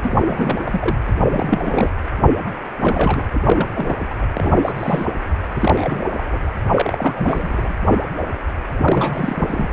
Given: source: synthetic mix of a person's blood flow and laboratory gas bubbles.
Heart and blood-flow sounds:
Doppler ultrasound of blood flow; precordium
0.03-0.60 s: bubbles
0.66-0.97 s: bubbles
1.31-1.90 s: bubbles
2.81-3.23 s: bubbles
3.31-3.72 s: bubbles
3.75-4.07 s: bubbles
4.10-4.14 s: bubbles
4.35-5.06 s: bubbles
5.50-6.25 s: bubbles
6.31-6.38 s: bubbles
6.74-7.73 s: bubbles
8.79-9.70 s: bubbles
From the record:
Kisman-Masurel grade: 332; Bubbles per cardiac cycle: rolling drumbeat, 9 or more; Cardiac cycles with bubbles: 50 to 99%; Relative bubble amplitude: moderate (0.250 to 0.450); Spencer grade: 3 (all of the cardiac periods contain showers or single bubble signals, but not dominating or overriding the cardiac motion signals); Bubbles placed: anywhere in the cardiac cycle

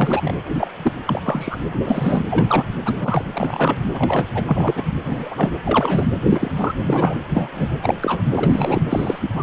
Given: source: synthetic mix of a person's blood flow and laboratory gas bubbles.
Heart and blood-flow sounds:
Doppler ultrasound of blood flow; precordium
0.00-0.34 s: bubbles
0.52-0.71 s: bubbles
0.82-0.92 s: bubbles
1.07-1.58 s: bubbles
1.72-1.79 s: bubbles
1.85-2.23 s: bubbles
2.30-2.64 s: bubbles
2.85-3.25 s: bubbles
3.33-3.78 s: bubbles
3.94-4.25 s: bubbles
4.34-4.43 s: bubbles
4.46-4.84 s: bubbles
5.04-5.50 s: bubbles
5.65-6.08 s: bubbles
6.30-6.51 s: bubbles
6.56-6.71 s: bubbles
6.84-7.15 s: bubbles
7.30-7.50 s: bubbles
7.54-7.68 s: bubbles
7.82-7.94 s: bubbles
8.02-8.21 s: bubbles
8.34-8.82 s: bubbles
8.90-9.19 s: bubbles
9.21-9.29 s: bubbles
9.35-9.43 s: bubbles
From the record:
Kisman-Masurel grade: 242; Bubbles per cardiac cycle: several, 3 to 8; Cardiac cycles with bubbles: 100%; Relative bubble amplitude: moderate (0.250 to 0.450); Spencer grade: 3 (all of the cardiac periods contain showers or single bubble signals, but not dominating or overriding the cardiac motion signals); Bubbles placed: anywhere in the cardiac cycle

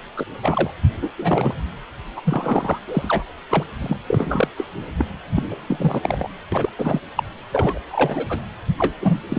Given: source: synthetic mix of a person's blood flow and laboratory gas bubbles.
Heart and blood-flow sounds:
Doppler ultrasound of blood flow; precordium
0.17-0.26 s: bubbles
0.42-0.71 s: bubbles
1.02-1.09 s: bubbles
1.18-1.55 s: bubbles
2.16-2.21 s: bubbles
2.23-2.79 s: bubbles
2.88-3.24 s: bubbles
3.49-3.64 s: bubbles
3.81-3.97 s: bubbles
4.06-4.47 s: bubbles
4.57-4.68 s: bubbles
4.98-5.05 s: bubbles
5.38-5.43 s: bubbles
5.51-5.56 s: bubbles
5.68-6.29 s: bubbles
6.52-6.69 s: bubbles
6.78-7.00 s: bubbles
7.16-7.23 s: bubbles
7.52-7.79 s: bubbles
7.89-8.45 s: bubbles
8.78-8.93 s: bubbles
9.00-9.21 s: bubbles
9.29-9.39 s: bubbles
From the record:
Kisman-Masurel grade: 343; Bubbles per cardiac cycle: rolling drumbeat, 9 or more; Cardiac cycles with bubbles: 100%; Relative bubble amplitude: loud (0.450 to 0.775); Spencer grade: 3 (all of the cardiac periods contain showers or single bubble signals, but not dominating or overriding the cardiac motion signals); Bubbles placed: anywhere in the cardiac cycle

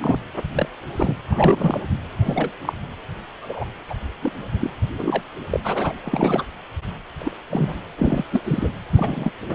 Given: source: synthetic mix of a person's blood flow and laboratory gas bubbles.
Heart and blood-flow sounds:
Doppler ultrasound of blood flow; precordium
0.00-0.20 s: bubbles
0.54-0.69 s: bubbles
0.96-1.16 s: bubbles
1.28-1.80 s: bubbles
2.25-2.51 s: bubbles
2.61-2.73 s: bubbles
3.42-3.65 s: bubbles
3.88-3.94 s: bubbles
4.22-4.32 s: bubbles
4.61-4.70 s: bubbles
4.99-5.23 s: bubbles
5.50-5.60 s: bubbles
5.64-5.93 s: bubbles
6.00-6.44 s: bubbles
7.20-7.34 s: bubbles
7.50-7.80 s: bubbles
7.97-8.25 s: bubbles
8.31-8.41 s: bubbles
8.44-8.75 s: bubbles
8.95-9.30 s: bubbles
9.49-9.55 s: bubbles
From the record:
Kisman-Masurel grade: 242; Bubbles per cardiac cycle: several, 3 to 8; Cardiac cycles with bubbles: 100%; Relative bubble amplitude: moderate (0.250 to 0.450); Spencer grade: 3 (all of the cardiac periods contain showers or single bubble signals, but not dominating or overriding the cardiac motion signals); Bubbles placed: anywhere in the cardiac cycle

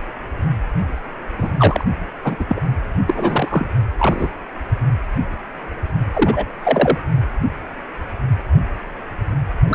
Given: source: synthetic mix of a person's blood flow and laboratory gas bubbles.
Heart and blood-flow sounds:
Doppler ultrasound of blood flow; precordium
1.38-1.52 s: bubbles
1.57-1.84 s: bubbles
2.24-2.36 s: bubbles
2.40-2.45 s: bubbles
2.48-2.62 s: bubbles
3.07-3.65 s: bubbles
3.99-4.28 s: bubbles
6.13-6.44 s: bubbles
6.63-6.98 s: bubbles
9.67-9.75 s: bubbles
From the record:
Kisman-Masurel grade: 233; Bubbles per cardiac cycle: several, 3 to 8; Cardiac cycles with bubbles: 50 to 99%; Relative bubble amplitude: loud (0.450 to 0.775); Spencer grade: 3 (all of the cardiac periods contain showers or single bubble signals, but not dominating or overriding the cardiac motion signals); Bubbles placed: only in the low amplitude regions of the cardiac cycle

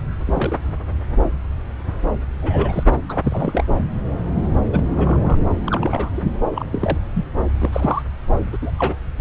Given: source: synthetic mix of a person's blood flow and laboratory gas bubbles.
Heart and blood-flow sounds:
Doppler ultrasound of blood flow; subclavian vein
0.27-0.55 s: bubbles
2.42-2.83 s: bubbles
3.08-3.64 s: bubbles
4.72-4.85 s: bubbles
4.97-5.38 s: bubbles
5.65-6.10 s: bubbles
6.17-6.21 s: bubbles
6.55-6.66 s: bubbles
6.71-6.98 s: bubbles
7.14-7.25 s: bubbles
7.60-8.03 s: bubbles
8.52-8.58 s: bubbles
8.62-8.72 s: bubbles
8.78-8.96 s: bubbles
From the record:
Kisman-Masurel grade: 232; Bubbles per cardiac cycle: several, 3 to 8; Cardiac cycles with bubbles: 50 to 99%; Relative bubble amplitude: moderate (0.250 to 0.450); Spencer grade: 3 (all of the cardiac periods contain showers or single bubble signals, but not dominating or overriding the cardiac motion signals); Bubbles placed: anywhere in the cardiac cycle

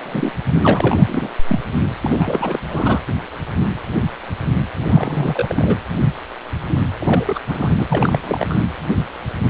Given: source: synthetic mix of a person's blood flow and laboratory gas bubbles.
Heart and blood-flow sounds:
Doppler ultrasound of blood flow; precordium
0.00-0.33 s: bubbles
0.61-1.30 s: bubbles
1.47-1.59 s: bubbles
2.03-2.60 s: bubbles
2.69-3.00 s: bubbles
4.75-5.76 s: bubbles
7.00-7.39 s: bubbles
7.47-7.84 s: bubbles
7.89-8.19 s: bubbles
8.22-8.55 s: bubbles
From the record:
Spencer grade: 3 (all of the cardiac periods contain showers or single bubble signals, but not dominating or overriding the cardiac motion signals); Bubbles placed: anywhere in the cardiac cycle

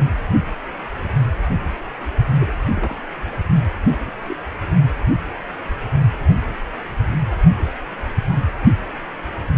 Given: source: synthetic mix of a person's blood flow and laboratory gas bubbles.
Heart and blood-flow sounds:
Doppler ultrasound of blood flow; precordium
2.40-2.53 s: bubbles
2.75-2.95 s: bubbles
4.07-4.12 s: bubbles
4.27-4.37 s: bubbles
From the record:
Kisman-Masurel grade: 121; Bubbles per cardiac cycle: 1 to 2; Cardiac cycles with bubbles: 10 to 50%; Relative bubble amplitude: barely perceptible (0.100 to 0.250); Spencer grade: 2 (many but less than half of the cardiac periods contain bubble signals, singularly or in groups); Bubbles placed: only in the low amplitude regions of the cardiac cycle

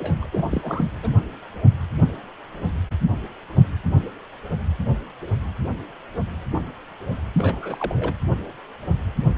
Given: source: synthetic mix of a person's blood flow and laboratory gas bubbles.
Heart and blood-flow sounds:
Doppler ultrasound of blood flow; precordium
0.00-0.27 s: bubbles
0.31-0.45 s: bubbles
0.51-0.91 s: bubbles
1.03-1.09 s: bubbles
7.37-8.14 s: bubbles
From the record:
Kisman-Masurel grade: 221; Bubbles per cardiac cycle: several, 3 to 8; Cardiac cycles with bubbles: 10 to 50%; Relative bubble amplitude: barely perceptible (0.100 to 0.250); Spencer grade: 2 (many but less than half of the cardiac periods contain bubble signals, singularly or in groups); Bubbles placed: anywhere in the cardiac cycle

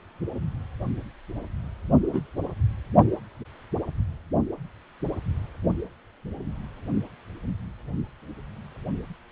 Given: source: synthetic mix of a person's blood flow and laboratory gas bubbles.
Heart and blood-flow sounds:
Doppler ultrasound of blood flow; precordium
2.12-2.21 s: bubbles
From the record:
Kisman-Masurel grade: 112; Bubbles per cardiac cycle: 1 to 2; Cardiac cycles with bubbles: 1 to 10%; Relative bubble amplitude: moderate (0.250 to 0.450); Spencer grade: 1 (occasional bubble signal discernible with the cardiac motion signal, with majority of cardiac periods free of bubbles); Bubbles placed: only in the low amplitude regions of the cardiac cycle

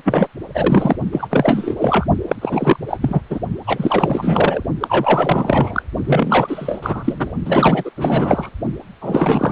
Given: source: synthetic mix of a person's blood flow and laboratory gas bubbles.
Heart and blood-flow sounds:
Doppler ultrasound of blood flow; precordium
0.00-0.28 s: bubbles
0.54-0.96 s: bubbles
1.11-1.27 s: bubbles
1.30-2.06 s: bubbles
2.28-2.35 s: bubbles
2.41-2.77 s: bubbles
2.88-2.99 s: bubbles
3.02-3.21 s: bubbles
3.29-3.40 s: bubbles
3.67-4.63 s: bubbles
4.80-5.83 s: bubbles
6.05-7.33 s: bubbles
7.45-7.90 s: bubbles
7.96-8.49 s: bubbles
9.01-9.52 s: bubbles
From the record:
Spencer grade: 4 (maximum detectable bubble signal sounding continuously throughout systole and diastole of every cardiac period, and overriding the amplitude of the normal cardiac signals); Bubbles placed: only in the low amplitude regions of the cardiac cycle

